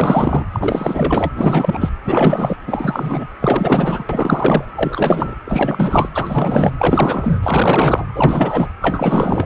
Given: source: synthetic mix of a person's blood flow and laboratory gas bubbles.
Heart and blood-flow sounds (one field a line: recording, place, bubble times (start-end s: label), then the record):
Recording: Doppler ultrasound of blood flow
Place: precordium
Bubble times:
0.00-0.44 s: bubbles
0.52-1.29 s: bubbles
1.37-1.91 s: bubbles
2.05-2.56 s: bubbles
2.67-3.27 s: bubbles
3.41-4.04 s: bubbles
4.09-4.64 s: bubbles
4.75-5.34 s: bubbles
5.44-6.09 s: bubbles
6.14-6.71 s: bubbles
6.79-7.39 s: bubbles
7.42-8.05 s: bubbles
8.15-8.68 s: bubbles
8.81-9.46 s: bubbles
From the record:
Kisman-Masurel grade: 444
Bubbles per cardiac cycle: continuous sound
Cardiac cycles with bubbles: 100%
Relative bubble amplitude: maximal (0.775 to 0.999)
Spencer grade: 4 (maximum detectable bubble signal sounding continuously throughout systole and diastole of every cardiac period, and overriding the amplitude of the normal cardiac signals)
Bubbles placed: anywhere in the cardiac cycle